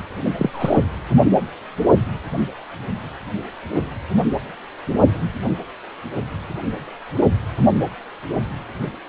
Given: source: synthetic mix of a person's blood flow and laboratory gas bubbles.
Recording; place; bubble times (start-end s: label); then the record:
Doppler ultrasound of blood flow; precordium
0.24-0.29 s: bubbles
0.38-0.80 s: bubbles
From the record:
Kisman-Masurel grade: 212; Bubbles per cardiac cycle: several, 3 to 8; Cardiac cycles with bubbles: 1 to 10%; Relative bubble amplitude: moderate (0.250 to 0.450); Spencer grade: 1 (occasional bubble signal discernible with the cardiac motion signal, with majority of cardiac periods free of bubbles); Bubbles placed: only in the low amplitude regions of the cardiac cycle